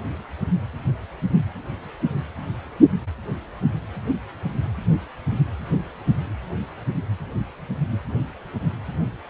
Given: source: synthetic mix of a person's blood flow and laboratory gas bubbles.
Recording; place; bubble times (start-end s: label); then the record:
Doppler ultrasound of blood flow; precordium
no bubbles
From the record:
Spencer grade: 0 (complete lack of bubble signals)